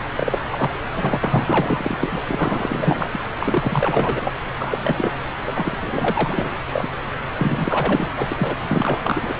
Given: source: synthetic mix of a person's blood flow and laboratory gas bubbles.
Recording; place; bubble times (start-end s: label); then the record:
Doppler ultrasound of blood flow; subclavian vein
0.16-0.38 s: bubbles
0.52-0.70 s: bubbles
0.96-1.19 s: bubbles
1.23-2.21 s: bubbles
2.27-3.20 s: bubbles
3.39-4.33 s: bubbles
4.58-4.79 s: bubbles
4.83-5.13 s: bubbles
5.44-6.58 s: bubbles
6.73-6.88 s: bubbles
7.38-8.11 s: bubbles
8.16-8.26 s: bubbles
8.31-8.56 s: bubbles
8.62-9.33 s: bubbles
From the record:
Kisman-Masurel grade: 333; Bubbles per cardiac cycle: rolling drumbeat, 9 or more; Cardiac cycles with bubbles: 50 to 99%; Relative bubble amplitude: loud (0.450 to 0.775); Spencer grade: 3 (all of the cardiac periods contain showers or single bubble signals, but not dominating or overriding the cardiac motion signals); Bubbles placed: anywhere in the cardiac cycle